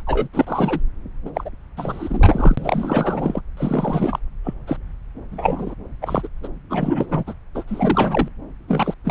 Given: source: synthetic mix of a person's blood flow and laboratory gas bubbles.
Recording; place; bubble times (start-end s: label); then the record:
Doppler ultrasound of blood flow; subclavian vein
0.00-0.03 s: bubbles
0.06-0.29 s: bubbles
0.33-0.81 s: bubbles
1.25-1.30 s: bubbles
1.34-1.50 s: bubbles
1.77-3.41 s: bubbles
3.57-4.19 s: bubbles
4.44-4.54 s: bubbles
4.66-4.77 s: bubbles
5.31-5.75 s: bubbles
6.02-6.28 s: bubbles
6.43-6.48 s: bubbles
6.70-7.34 s: bubbles
7.54-7.63 s: bubbles
7.67-8.29 s: bubbles
8.67-8.94 s: bubbles
9.04-9.11 s: bubbles
From the record:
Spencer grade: 3 (all of the cardiac periods contain showers or single bubble signals, but not dominating or overriding the cardiac motion signals); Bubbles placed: anywhere in the cardiac cycle